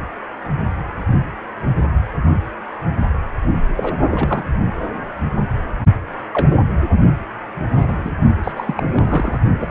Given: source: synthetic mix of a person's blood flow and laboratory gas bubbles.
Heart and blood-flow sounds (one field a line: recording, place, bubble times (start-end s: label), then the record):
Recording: Doppler ultrasound of blood flow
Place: precordium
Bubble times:
3.77-3.94 s: bubbles
4.11-4.44 s: bubbles
6.31-6.56 s: bubbles
7.71-8.12 s: bubbles
8.43-8.53 s: bubbles
8.56-8.83 s: bubbles
8.92-9.40 s: bubbles
9.60-9.71 s: bubbles
From the record:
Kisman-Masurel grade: 222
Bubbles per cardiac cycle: several, 3 to 8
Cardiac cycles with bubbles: 10 to 50%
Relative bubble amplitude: moderate (0.250 to 0.450)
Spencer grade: 2 (many but less than half of the cardiac periods contain bubble signals, singularly or in groups)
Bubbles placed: only in the low amplitude regions of the cardiac cycle